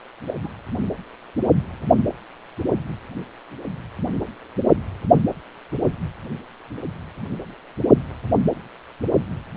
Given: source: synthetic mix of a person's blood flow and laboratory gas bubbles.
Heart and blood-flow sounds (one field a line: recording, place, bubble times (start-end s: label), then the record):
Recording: Doppler ultrasound of blood flow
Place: precordium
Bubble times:
0.27-0.33 s: bubbles
0.42-0.49 s: bubbles
From the record:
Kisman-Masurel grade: 222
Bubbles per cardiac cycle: several, 3 to 8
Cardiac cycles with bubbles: 10 to 50%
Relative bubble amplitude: moderate (0.250 to 0.450)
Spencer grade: 2 (many but less than half of the cardiac periods contain bubble signals, singularly or in groups)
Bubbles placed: only in the low amplitude regions of the cardiac cycle